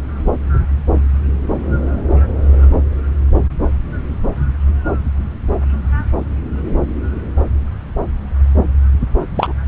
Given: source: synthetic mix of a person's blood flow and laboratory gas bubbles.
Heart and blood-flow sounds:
Doppler ultrasound of blood flow; subclavian vein
9.35-9.53 s: bubbles
From the record:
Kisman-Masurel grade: 123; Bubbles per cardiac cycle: 1 to 2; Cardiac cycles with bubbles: 10 to 50%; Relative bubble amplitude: loud (0.450 to 0.775); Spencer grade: 2 (many but less than half of the cardiac periods contain bubble signals, singularly or in groups); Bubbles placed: anywhere in the cardiac cycle

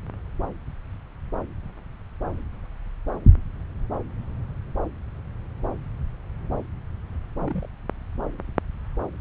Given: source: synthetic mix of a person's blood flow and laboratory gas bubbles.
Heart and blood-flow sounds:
Doppler ultrasound of blood flow; subclavian vein
7.40-7.66 s: bubbles
From the record:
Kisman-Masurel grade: 121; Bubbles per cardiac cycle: 1 to 2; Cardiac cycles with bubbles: 10 to 50%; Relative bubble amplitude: barely perceptible (0.100 to 0.250); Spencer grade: 2 (many but less than half of the cardiac periods contain bubble signals, singularly or in groups); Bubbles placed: anywhere in the cardiac cycle

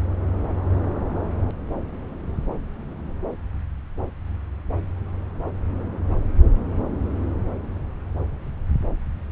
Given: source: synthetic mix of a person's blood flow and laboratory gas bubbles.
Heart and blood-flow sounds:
Doppler ultrasound of blood flow; subclavian vein
no bubbles
From the record:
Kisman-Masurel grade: 000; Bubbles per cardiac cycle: 0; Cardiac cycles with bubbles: 0%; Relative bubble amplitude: no bubbles discernible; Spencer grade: 0 (complete lack of bubble signals)

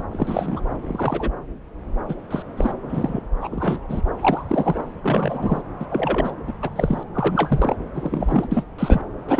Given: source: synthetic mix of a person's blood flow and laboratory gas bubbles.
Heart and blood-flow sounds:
Doppler ultrasound of blood flow; subclavian vein
0.00-0.04 s: bubbles
0.11-0.60 s: bubbles
0.87-1.30 s: bubbles
2.08-2.15 s: bubbles
2.31-2.42 s: bubbles
2.56-2.73 s: bubbles
2.89-3.21 s: bubbles
3.41-3.49 s: bubbles
3.52-3.79 s: bubbles
3.88-4.01 s: bubbles
4.21-4.43 s: bubbles
4.49-4.81 s: bubbles
5.02-5.62 s: bubbles
5.79-5.86 s: bubbles
5.90-6.32 s: bubbles
6.47-6.53 s: bubbles
6.62-6.70 s: bubbles
6.75-7.03 s: bubbles
7.13-7.76 s: bubbles
7.95-8.48 s: bubbles
8.51-8.65 s: bubbles
8.78-9.01 s: bubbles
9.27-9.40 s: bubbles
From the record:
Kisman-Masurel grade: 232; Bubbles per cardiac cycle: several, 3 to 8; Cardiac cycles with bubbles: 50 to 99%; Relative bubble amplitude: moderate (0.250 to 0.450); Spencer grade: 3 (all of the cardiac periods contain showers or single bubble signals, but not dominating or overriding the cardiac motion signals); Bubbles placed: anywhere in the cardiac cycle

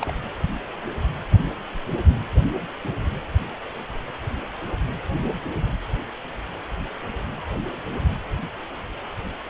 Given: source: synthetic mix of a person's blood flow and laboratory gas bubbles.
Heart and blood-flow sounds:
Doppler ultrasound of blood flow; precordium
0.01-0.12 s: bubbles
From the record:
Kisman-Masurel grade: 212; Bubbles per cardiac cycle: several, 3 to 8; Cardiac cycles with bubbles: 1 to 10%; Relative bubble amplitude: moderate (0.250 to 0.450); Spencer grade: 1 (occasional bubble signal discernible with the cardiac motion signal, with majority of cardiac periods free of bubbles); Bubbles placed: anywhere in the cardiac cycle

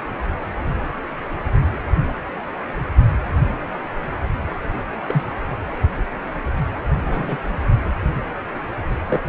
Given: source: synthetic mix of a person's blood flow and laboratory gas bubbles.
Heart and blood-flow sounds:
Doppler ultrasound of blood flow; precordium
5.08-5.24 s: bubbles
7.07-7.39 s: bubbles
9.06-9.21 s: bubbles
From the record:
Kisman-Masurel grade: 122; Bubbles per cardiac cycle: 1 to 2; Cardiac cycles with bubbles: 10 to 50%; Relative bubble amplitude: moderate (0.250 to 0.450); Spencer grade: 2 (many but less than half of the cardiac periods contain bubble signals, singularly or in groups); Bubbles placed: only in the low amplitude regions of the cardiac cycle

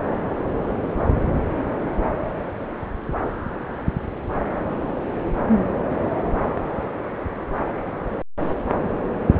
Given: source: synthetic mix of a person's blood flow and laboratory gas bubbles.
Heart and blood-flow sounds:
Doppler ultrasound of blood flow; subclavian vein
no bubbles
From the record:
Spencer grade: 0 (complete lack of bubble signals)

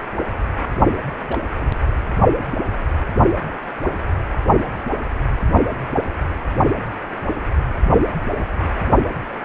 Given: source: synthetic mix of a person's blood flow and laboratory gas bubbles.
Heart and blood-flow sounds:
Doppler ultrasound of blood flow; precordium
1.27-1.38 s: bubbles
1.60-1.71 s: bubbles
From the record:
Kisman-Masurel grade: 111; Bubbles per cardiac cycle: 1 to 2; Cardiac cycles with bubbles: 1 to 10%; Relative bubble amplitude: barely perceptible (0.100 to 0.250); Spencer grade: 1 (occasional bubble signal discernible with the cardiac motion signal, with majority of cardiac periods free of bubbles); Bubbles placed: only in the low amplitude regions of the cardiac cycle

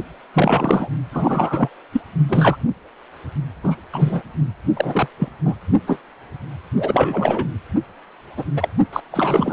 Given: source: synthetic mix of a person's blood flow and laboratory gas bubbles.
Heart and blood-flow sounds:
Doppler ultrasound of blood flow; precordium
0.34-0.89 s: bubbles
1.12-1.69 s: bubbles
1.93-2.00 s: bubbles
2.29-2.57 s: bubbles
3.63-3.75 s: bubbles
3.92-4.21 s: bubbles
4.76-5.08 s: bubbles
5.19-5.29 s: bubbles
5.44-5.56 s: bubbles
5.87-5.99 s: bubbles
6.77-7.48 s: bubbles
8.37-8.45 s: bubbles
8.56-8.69 s: bubbles
8.93-9.00 s: bubbles
9.12-9.53 s: bubbles
From the record:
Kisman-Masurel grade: 243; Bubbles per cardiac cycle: several, 3 to 8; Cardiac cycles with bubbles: 100%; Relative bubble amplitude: loud (0.450 to 0.775); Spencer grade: 3 (all of the cardiac periods contain showers or single bubble signals, but not dominating or overriding the cardiac motion signals); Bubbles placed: only in the low amplitude regions of the cardiac cycle

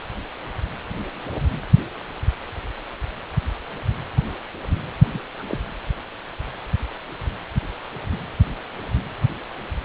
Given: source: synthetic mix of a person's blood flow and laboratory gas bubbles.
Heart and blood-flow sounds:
Doppler ultrasound of blood flow; precordium
5.12-5.21 s: bubbles
5.39-5.43 s: bubbles
5.50-5.58 s: bubbles
From the record:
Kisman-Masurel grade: 211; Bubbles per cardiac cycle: several, 3 to 8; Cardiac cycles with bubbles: 1 to 10%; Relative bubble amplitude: barely perceptible (0.100 to 0.250); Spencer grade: 1 (occasional bubble signal discernible with the cardiac motion signal, with majority of cardiac periods free of bubbles); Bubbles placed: anywhere in the cardiac cycle

